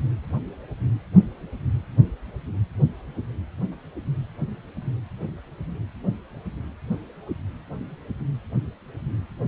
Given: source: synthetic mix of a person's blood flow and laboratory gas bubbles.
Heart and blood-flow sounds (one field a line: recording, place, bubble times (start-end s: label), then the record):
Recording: Doppler ultrasound of blood flow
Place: precordium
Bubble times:
no bubbles
From the record:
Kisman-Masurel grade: 000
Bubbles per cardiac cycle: 0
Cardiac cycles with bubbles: 0%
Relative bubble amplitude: no bubbles discernible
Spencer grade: 0 (complete lack of bubble signals)